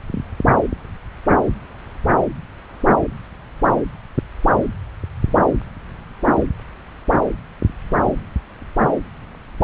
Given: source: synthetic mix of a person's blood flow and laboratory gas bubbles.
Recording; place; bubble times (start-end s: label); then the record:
Doppler ultrasound of blood flow; subclavian vein
no bubbles
From the record:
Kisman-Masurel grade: 000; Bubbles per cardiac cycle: 0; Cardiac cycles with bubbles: 0%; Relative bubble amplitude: no bubbles discernible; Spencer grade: 0 (complete lack of bubble signals)